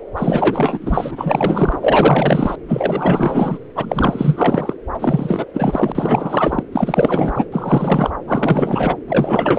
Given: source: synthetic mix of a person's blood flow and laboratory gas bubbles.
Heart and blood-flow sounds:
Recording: Doppler ultrasound of blood flow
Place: subclavian vein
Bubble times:
0.17-2.55 s: bubbles
2.68-3.59 s: bubbles
3.75-4.74 s: bubbles
4.93-5.45 s: bubbles
5.54-5.92 s: bubbles
5.95-6.63 s: bubbles
6.72-8.11 s: bubbles
8.27-8.95 s: bubbles
9.07-9.58 s: bubbles
From the record:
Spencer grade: 4 (maximum detectable bubble signal sounding continuously throughout systole and diastole of every cardiac period, and overriding the amplitude of the normal cardiac signals)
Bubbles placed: anywhere in the cardiac cycle

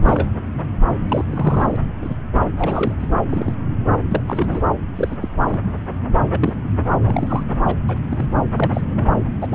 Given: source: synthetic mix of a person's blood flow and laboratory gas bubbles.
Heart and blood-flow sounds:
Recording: Doppler ultrasound of blood flow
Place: subclavian vein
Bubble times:
0.01-0.29 s: bubbles
0.96-1.24 s: bubbles
1.29-1.76 s: bubbles
2.02-2.16 s: bubbles
2.35-2.40 s: bubbles
2.58-2.94 s: bubbles
2.99-3.08 s: bubbles
3.29-3.54 s: bubbles
4.09-4.22 s: bubbles
4.27-4.61 s: bubbles
4.95-5.17 s: bubbles
5.21-5.29 s: bubbles
5.47-5.60 s: bubbles
6.32-6.55 s: bubbles
7.05-7.44 s: bubbles
7.67-7.77 s: bubbles
7.88-7.98 s: bubbles
8.11-8.27 s: bubbles
8.56-9.09 s: bubbles
9.41-9.47 s: bubbles
9.50-9.54 s: bubbles
From the record:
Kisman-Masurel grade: 242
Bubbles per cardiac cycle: several, 3 to 8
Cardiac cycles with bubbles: 100%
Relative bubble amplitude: moderate (0.250 to 0.450)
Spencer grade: 3 (all of the cardiac periods contain showers or single bubble signals, but not dominating or overriding the cardiac motion signals)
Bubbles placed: anywhere in the cardiac cycle

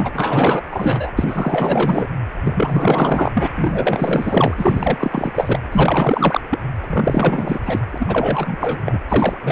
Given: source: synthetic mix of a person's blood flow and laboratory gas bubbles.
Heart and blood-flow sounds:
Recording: Doppler ultrasound of blood flow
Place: precordium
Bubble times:
0.00-0.62 s: bubbles
0.70-1.12 s: bubbles
1.17-2.07 s: bubbles
2.40-3.48 s: bubbles
3.56-4.54 s: bubbles
4.57-5.59 s: bubbles
5.72-6.41 s: bubbles
6.50-6.58 s: bubbles
6.80-7.60 s: bubbles
7.65-7.80 s: bubbles
7.91-8.82 s: bubbles
8.85-8.98 s: bubbles
9.08-9.37 s: bubbles
9.43-9.52 s: bubbles
From the record:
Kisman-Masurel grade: 444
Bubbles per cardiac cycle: continuous sound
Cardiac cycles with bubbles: 100%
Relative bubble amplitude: maximal (0.775 to 0.999)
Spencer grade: 4 (maximum detectable bubble signal sounding continuously throughout systole and diastole of every cardiac period, and overriding the amplitude of the normal cardiac signals)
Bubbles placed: anywhere in the cardiac cycle

